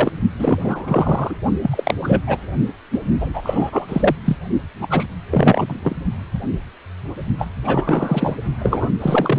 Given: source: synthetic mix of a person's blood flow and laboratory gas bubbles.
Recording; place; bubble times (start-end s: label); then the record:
Doppler ultrasound of blood flow; precordium
0.00-0.12 s: bubbles
0.39-0.60 s: bubbles
0.64-1.35 s: bubbles
1.61-1.94 s: bubbles
2.02-2.22 s: bubbles
2.27-2.38 s: bubbles
2.92-3.01 s: bubbles
3.21-3.29 s: bubbles
3.33-3.86 s: bubbles
3.88-4.16 s: bubbles
4.25-4.37 s: bubbles
4.81-4.87 s: bubbles
4.90-5.06 s: bubbles
5.31-5.79 s: bubbles
5.83-5.96 s: bubbles
7.38-7.49 s: bubbles
7.64-8.36 s: bubbles
8.62-8.89 s: bubbles
9.00-9.39 s: bubbles
From the record:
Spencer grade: 3 (all of the cardiac periods contain showers or single bubble signals, but not dominating or overriding the cardiac motion signals); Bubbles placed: only in the low amplitude regions of the cardiac cycle